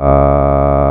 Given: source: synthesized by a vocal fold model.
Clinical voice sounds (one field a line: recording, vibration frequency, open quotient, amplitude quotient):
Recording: sustained vowel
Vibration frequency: 70 Hz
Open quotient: 0.5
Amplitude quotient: 1.1